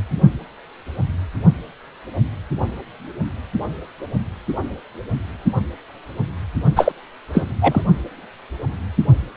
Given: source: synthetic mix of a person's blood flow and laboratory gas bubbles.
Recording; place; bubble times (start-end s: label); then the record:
Doppler ultrasound of blood flow; precordium
6.76-6.92 s: bubbles
7.33-7.45 s: bubbles
7.61-7.82 s: bubbles
From the record:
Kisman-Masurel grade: 223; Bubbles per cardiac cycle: several, 3 to 8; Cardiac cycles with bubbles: 10 to 50%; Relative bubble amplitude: loud (0.450 to 0.775); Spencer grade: 2 (many but less than half of the cardiac periods contain bubble signals, singularly or in groups); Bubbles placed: only in the low amplitude regions of the cardiac cycle